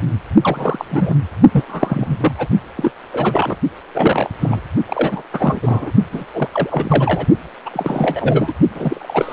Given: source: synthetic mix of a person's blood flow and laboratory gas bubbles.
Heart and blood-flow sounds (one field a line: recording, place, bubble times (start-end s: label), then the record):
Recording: Doppler ultrasound of blood flow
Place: precordium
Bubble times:
0.42-0.85 s: bubbles
0.90-1.15 s: bubbles
1.52-1.64 s: bubbles
1.67-2.32 s: bubbles
2.38-2.48 s: bubbles
2.76-2.91 s: bubbles
3.12-3.55 s: bubbles
3.94-4.30 s: bubbles
4.41-4.60 s: bubbles
4.86-5.22 s: bubbles
5.33-5.92 s: bubbles
6.12-6.25 s: bubbles
6.33-6.49 s: bubbles
6.52-7.26 s: bubbles
7.66-7.70 s: bubbles
7.73-8.53 s: bubbles
8.75-9.33 s: bubbles
From the record:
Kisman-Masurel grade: 342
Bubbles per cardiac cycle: rolling drumbeat, 9 or more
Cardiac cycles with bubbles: 100%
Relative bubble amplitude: moderate (0.250 to 0.450)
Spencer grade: 3 (all of the cardiac periods contain showers or single bubble signals, but not dominating or overriding the cardiac motion signals)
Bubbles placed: only in the low amplitude regions of the cardiac cycle